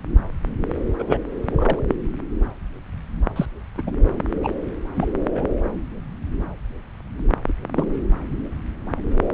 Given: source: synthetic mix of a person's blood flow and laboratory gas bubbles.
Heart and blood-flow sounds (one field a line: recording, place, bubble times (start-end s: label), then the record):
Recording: Doppler ultrasound of blood flow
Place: subclavian vein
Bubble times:
0.98-1.03 s: bubbles
1.08-1.18 s: bubbles
1.52-1.81 s: bubbles
1.88-1.95 s: bubbles
3.35-3.46 s: bubbles
3.78-3.82 s: bubbles
3.87-3.92 s: bubbles
4.42-4.49 s: bubbles
4.96-5.07 s: bubbles
5.34-5.46 s: bubbles
7.48-7.53 s: bubbles
7.75-7.88 s: bubbles
From the record:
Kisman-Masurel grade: 222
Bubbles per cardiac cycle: several, 3 to 8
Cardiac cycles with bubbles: 10 to 50%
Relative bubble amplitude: moderate (0.250 to 0.450)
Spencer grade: 2 (many but less than half of the cardiac periods contain bubble signals, singularly or in groups)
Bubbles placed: anywhere in the cardiac cycle